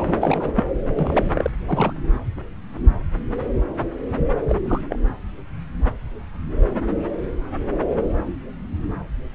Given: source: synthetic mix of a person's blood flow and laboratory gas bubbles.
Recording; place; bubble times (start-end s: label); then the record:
Doppler ultrasound of blood flow; subclavian vein
0.00-0.13 s: bubbles
0.21-0.52 s: bubbles
0.54-0.64 s: bubbles
0.88-0.94 s: bubbles
0.99-1.52 s: bubbles
1.68-1.93 s: bubbles
4.49-4.56 s: bubbles
4.65-4.81 s: bubbles
4.90-4.99 s: bubbles
From the record:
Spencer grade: 2 (many but less than half of the cardiac periods contain bubble signals, singularly or in groups); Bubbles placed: anywhere in the cardiac cycle